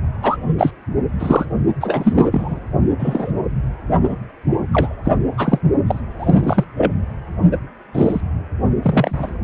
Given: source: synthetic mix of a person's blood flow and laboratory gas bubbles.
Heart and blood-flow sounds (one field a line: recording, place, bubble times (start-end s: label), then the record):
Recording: Doppler ultrasound of blood flow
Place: precordium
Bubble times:
0.22-0.36 s: bubbles
0.58-0.71 s: bubbles
1.19-1.46 s: bubbles
1.81-2.28 s: bubbles
2.31-2.59 s: bubbles
2.99-3.32 s: bubbles
4.03-4.15 s: bubbles
4.72-4.95 s: bubbles
5.04-5.12 s: bubbles
5.37-5.58 s: bubbles
5.87-6.00 s: bubbles
6.19-6.64 s: bubbles
6.76-6.92 s: bubbles
7.51-7.57 s: bubbles
7.94-8.21 s: bubbles
8.82-9.29 s: bubbles
From the record:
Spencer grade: 3 (all of the cardiac periods contain showers or single bubble signals, but not dominating or overriding the cardiac motion signals)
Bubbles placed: only in the low amplitude regions of the cardiac cycle